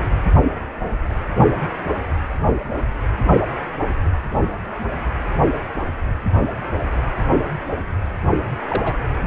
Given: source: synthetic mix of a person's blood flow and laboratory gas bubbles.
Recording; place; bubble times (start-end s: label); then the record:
Doppler ultrasound of blood flow; precordium
8.68-8.95 s: bubbles
From the record:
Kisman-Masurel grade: 112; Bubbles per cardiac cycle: 1 to 2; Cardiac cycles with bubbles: 1 to 10%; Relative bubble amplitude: moderate (0.250 to 0.450); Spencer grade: 1 (occasional bubble signal discernible with the cardiac motion signal, with majority of cardiac periods free of bubbles); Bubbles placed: only in the low amplitude regions of the cardiac cycle